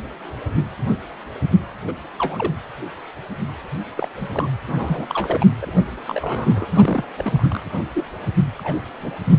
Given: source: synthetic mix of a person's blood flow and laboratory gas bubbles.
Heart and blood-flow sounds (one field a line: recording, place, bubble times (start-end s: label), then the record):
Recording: Doppler ultrasound of blood flow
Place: precordium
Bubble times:
1.88-1.94 s: bubbles
2.18-2.54 s: bubbles
3.97-4.07 s: bubbles
4.18-4.28 s: bubbles
4.32-4.47 s: bubbles
4.67-5.07 s: bubbles
5.09-5.44 s: bubbles
5.61-5.83 s: bubbles
6.08-6.65 s: bubbles
6.71-7.04 s: bubbles
7.18-7.48 s: bubbles
7.50-7.63 s: bubbles
7.94-8.09 s: bubbles
8.57-8.80 s: bubbles
8.99-9.13 s: bubbles
9.25-9.39 s: bubbles
From the record:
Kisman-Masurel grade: 232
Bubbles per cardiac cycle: several, 3 to 8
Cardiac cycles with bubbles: 50 to 99%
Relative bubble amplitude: moderate (0.250 to 0.450)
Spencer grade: 3 (all of the cardiac periods contain showers or single bubble signals, but not dominating or overriding the cardiac motion signals)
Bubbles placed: anywhere in the cardiac cycle